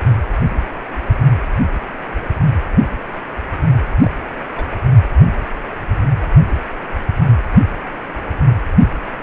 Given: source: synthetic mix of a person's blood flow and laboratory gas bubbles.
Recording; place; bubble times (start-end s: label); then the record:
Doppler ultrasound of blood flow; precordium
4.02-4.10 s: bubbles
4.56-4.65 s: bubbles
4.71-4.76 s: bubbles
From the record:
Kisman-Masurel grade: 211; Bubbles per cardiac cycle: several, 3 to 8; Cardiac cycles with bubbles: 1 to 10%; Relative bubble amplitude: barely perceptible (0.100 to 0.250); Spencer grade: 1 (occasional bubble signal discernible with the cardiac motion signal, with majority of cardiac periods free of bubbles); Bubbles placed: anywhere in the cardiac cycle